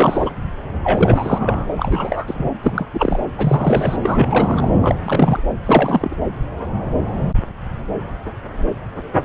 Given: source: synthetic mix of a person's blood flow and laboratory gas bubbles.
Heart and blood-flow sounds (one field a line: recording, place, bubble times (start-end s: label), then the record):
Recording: Doppler ultrasound of blood flow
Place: subclavian vein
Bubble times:
0.00-0.30 s: bubbles
0.82-1.69 s: bubbles
1.76-2.49 s: bubbles
2.63-2.86 s: bubbles
2.93-3.20 s: bubbles
3.38-3.96 s: bubbles
4.02-4.68 s: bubbles
4.81-4.95 s: bubbles
5.03-5.39 s: bubbles
5.65-6.16 s: bubbles
From the record:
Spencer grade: 3 (all of the cardiac periods contain showers or single bubble signals, but not dominating or overriding the cardiac motion signals)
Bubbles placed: anywhere in the cardiac cycle